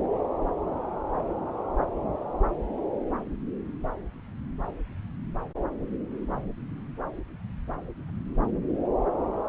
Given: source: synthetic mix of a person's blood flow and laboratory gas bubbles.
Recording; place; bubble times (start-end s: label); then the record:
Doppler ultrasound of blood flow; subclavian vein
no bubbles
From the record:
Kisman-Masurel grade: 000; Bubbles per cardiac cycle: 0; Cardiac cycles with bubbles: 0%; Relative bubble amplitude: no bubbles discernible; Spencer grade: 0 (complete lack of bubble signals)